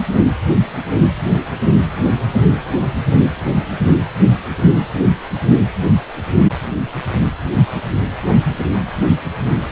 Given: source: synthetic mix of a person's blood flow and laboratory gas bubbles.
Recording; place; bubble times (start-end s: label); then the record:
Doppler ultrasound of blood flow; precordium
no bubbles
From the record:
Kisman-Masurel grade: 000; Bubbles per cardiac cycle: 0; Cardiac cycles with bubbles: 0%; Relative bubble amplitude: no bubbles discernible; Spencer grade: 0 (complete lack of bubble signals)